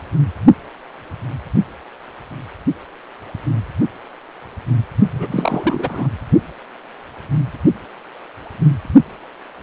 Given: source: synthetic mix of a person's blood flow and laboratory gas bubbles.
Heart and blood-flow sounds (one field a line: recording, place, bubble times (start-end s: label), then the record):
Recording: Doppler ultrasound of blood flow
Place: precordium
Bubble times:
5.12-6.08 s: bubbles
From the record:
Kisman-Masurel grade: 212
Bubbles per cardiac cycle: several, 3 to 8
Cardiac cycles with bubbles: 1 to 10%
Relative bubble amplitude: moderate (0.250 to 0.450)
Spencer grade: 1 (occasional bubble signal discernible with the cardiac motion signal, with majority of cardiac periods free of bubbles)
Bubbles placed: only in the low amplitude regions of the cardiac cycle